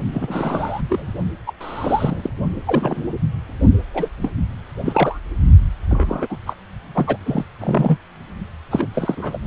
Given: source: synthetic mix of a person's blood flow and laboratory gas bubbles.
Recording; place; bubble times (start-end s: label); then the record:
Doppler ultrasound of blood flow; precordium
0.14-0.82 s: bubbles
0.89-1.08 s: bubbles
1.46-1.52 s: bubbles
1.60-2.30 s: bubbles
2.67-3.04 s: bubbles
3.94-4.09 s: bubbles
4.17-4.31 s: bubbles
4.85-5.19 s: bubbles
5.89-6.37 s: bubbles
6.46-6.54 s: bubbles
6.95-7.17 s: bubbles
7.26-7.43 s: bubbles
7.60-7.97 s: bubbles
8.71-8.88 s: bubbles
8.94-9.38 s: bubbles
From the record:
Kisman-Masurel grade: 242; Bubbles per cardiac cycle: several, 3 to 8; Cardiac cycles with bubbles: 100%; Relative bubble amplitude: moderate (0.250 to 0.450); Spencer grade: 3 (all of the cardiac periods contain showers or single bubble signals, but not dominating or overriding the cardiac motion signals); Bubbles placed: only in the low amplitude regions of the cardiac cycle